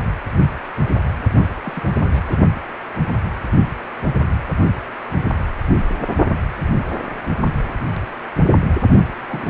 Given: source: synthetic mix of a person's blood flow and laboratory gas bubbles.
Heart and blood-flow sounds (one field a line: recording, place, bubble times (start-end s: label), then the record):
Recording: Doppler ultrasound of blood flow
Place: precordium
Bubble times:
1.36-1.48 s: bubbles
1.63-2.24 s: bubbles
2.27-2.38 s: bubbles
9.27-9.50 s: bubbles
From the record:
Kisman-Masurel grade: 221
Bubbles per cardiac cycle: several, 3 to 8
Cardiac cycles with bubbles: 10 to 50%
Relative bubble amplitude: barely perceptible (0.100 to 0.250)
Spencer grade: 2 (many but less than half of the cardiac periods contain bubble signals, singularly or in groups)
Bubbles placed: only in the low amplitude regions of the cardiac cycle